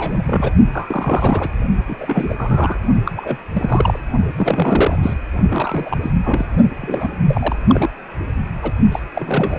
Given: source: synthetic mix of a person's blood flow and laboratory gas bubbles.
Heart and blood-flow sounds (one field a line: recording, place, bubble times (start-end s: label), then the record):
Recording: Doppler ultrasound of blood flow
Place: precordium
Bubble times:
0.00-0.52 s: bubbles
0.73-1.49 s: bubbles
1.88-1.96 s: bubbles
1.99-2.35 s: bubbles
2.38-2.78 s: bubbles
3.05-3.11 s: bubbles
3.15-3.38 s: bubbles
3.53-3.99 s: bubbles
4.38-4.99 s: bubbles
5.03-5.14 s: bubbles
5.49-6.11 s: bubbles
6.23-6.46 s: bubbles
6.81-7.13 s: bubbles
7.28-7.56 s: bubbles
7.67-7.89 s: bubbles
8.62-8.71 s: bubbles
8.91-8.99 s: bubbles
9.13-9.59 s: bubbles
From the record:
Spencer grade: 3 (all of the cardiac periods contain showers or single bubble signals, but not dominating or overriding the cardiac motion signals)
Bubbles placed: only in the low amplitude regions of the cardiac cycle